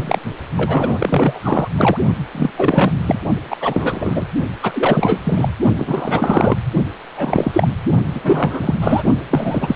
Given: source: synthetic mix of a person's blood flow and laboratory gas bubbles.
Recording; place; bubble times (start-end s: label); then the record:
Doppler ultrasound of blood flow; precordium
0.00-0.18 s: bubbles
0.57-1.40 s: bubbles
1.43-1.68 s: bubbles
1.76-1.98 s: bubbles
2.34-2.50 s: bubbles
2.57-3.17 s: bubbles
3.50-3.56 s: bubbles
3.60-4.25 s: bubbles
4.62-5.19 s: bubbles
5.25-5.49 s: bubbles
5.77-6.56 s: bubbles
7.12-7.68 s: bubbles
8.14-8.21 s: bubbles
8.23-8.74 s: bubbles
8.81-9.04 s: bubbles
9.30-9.75 s: bubbles
From the record:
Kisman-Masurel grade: 333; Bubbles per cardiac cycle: rolling drumbeat, 9 or more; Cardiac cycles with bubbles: 50 to 99%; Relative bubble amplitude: loud (0.450 to 0.775); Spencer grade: 3 (all of the cardiac periods contain showers or single bubble signals, but not dominating or overriding the cardiac motion signals); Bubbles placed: only in the low amplitude regions of the cardiac cycle